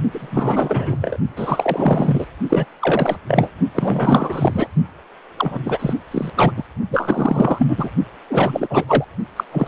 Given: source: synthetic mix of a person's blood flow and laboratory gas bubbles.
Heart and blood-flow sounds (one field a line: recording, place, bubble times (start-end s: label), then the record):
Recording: Doppler ultrasound of blood flow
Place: precordium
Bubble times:
0.12-1.19 s: bubbles
1.36-2.26 s: bubbles
2.49-2.66 s: bubbles
2.80-3.17 s: bubbles
3.27-3.50 s: bubbles
3.75-4.67 s: bubbles
5.38-5.58 s: bubbles
5.66-5.93 s: bubbles
6.11-6.30 s: bubbles
6.36-6.53 s: bubbles
6.57-6.63 s: bubbles
6.90-7.90 s: bubbles
8.29-8.84 s: bubbles
8.88-9.04 s: bubbles
9.36-9.44 s: bubbles
9.52-9.68 s: bubbles
From the record:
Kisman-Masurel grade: 444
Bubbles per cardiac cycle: continuous sound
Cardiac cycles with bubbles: 100%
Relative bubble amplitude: maximal (0.775 to 0.999)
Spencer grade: 4 (maximum detectable bubble signal sounding continuously throughout systole and diastole of every cardiac period, and overriding the amplitude of the normal cardiac signals)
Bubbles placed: only in the low amplitude regions of the cardiac cycle